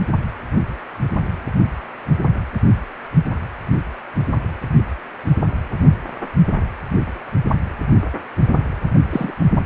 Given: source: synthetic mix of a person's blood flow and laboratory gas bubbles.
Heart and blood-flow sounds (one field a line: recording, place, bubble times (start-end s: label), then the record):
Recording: Doppler ultrasound of blood flow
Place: precordium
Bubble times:
9.10-9.32 s: bubbles
From the record:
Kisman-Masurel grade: 112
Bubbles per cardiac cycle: 1 to 2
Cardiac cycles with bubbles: 1 to 10%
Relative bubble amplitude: moderate (0.250 to 0.450)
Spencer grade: 1 (occasional bubble signal discernible with the cardiac motion signal, with majority of cardiac periods free of bubbles)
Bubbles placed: anywhere in the cardiac cycle